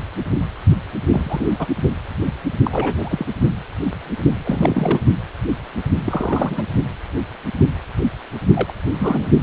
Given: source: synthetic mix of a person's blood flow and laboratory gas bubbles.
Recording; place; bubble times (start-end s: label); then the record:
Doppler ultrasound of blood flow; precordium
1.08-1.46 s: bubbles
1.59-1.68 s: bubbles
2.63-3.26 s: bubbles
4.44-5.00 s: bubbles
6.06-6.71 s: bubbles
8.54-8.73 s: bubbles
8.95-9.28 s: bubbles
From the record:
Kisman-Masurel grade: 222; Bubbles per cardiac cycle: several, 3 to 8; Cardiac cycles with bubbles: 10 to 50%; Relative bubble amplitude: moderate (0.250 to 0.450); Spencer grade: 2 (many but less than half of the cardiac periods contain bubble signals, singularly or in groups); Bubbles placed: only in the low amplitude regions of the cardiac cycle